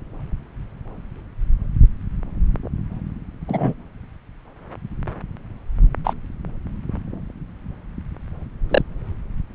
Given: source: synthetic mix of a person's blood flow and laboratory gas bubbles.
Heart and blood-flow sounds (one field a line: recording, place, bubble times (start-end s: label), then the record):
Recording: Doppler ultrasound of blood flow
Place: subclavian vein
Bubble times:
3.48-3.74 s: bubbles
6.04-6.13 s: bubbles
8.69-8.81 s: bubbles
From the record:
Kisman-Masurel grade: 123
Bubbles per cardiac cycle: 1 to 2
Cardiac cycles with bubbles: 10 to 50%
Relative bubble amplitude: loud (0.450 to 0.775)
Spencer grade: 2 (many but less than half of the cardiac periods contain bubble signals, singularly or in groups)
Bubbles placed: anywhere in the cardiac cycle